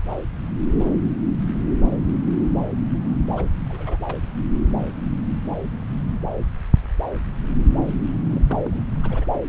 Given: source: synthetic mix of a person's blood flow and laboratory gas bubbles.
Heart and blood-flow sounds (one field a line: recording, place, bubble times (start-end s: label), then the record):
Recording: Doppler ultrasound of blood flow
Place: subclavian vein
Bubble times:
3.34-3.45 s: bubbles
3.66-3.97 s: bubbles
4.07-4.15 s: bubbles
4.22-4.27 s: bubbles
8.29-8.82 s: bubbles
9.03-9.28 s: bubbles
9.34-9.41 s: bubbles
From the record:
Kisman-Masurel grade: 221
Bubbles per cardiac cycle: several, 3 to 8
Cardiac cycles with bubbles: 10 to 50%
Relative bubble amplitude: barely perceptible (0.100 to 0.250)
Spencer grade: 2 (many but less than half of the cardiac periods contain bubble signals, singularly or in groups)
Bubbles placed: anywhere in the cardiac cycle